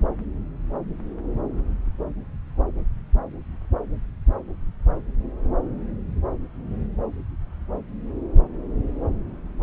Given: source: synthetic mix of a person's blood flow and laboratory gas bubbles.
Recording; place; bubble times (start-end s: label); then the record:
Doppler ultrasound of blood flow; subclavian vein
no bubbles
From the record:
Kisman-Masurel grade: 000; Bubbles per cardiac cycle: 0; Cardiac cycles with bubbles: 0%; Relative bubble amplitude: no bubbles discernible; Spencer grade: 0 (complete lack of bubble signals)